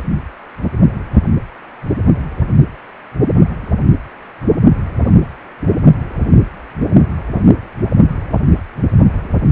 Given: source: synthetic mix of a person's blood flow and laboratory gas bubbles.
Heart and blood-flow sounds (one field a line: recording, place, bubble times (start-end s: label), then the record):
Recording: Doppler ultrasound of blood flow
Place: precordium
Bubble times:
no bubbles
From the record:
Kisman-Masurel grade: 000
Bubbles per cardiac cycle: 0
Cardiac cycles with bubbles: 0%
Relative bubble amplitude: no bubbles discernible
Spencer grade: 0 (complete lack of bubble signals)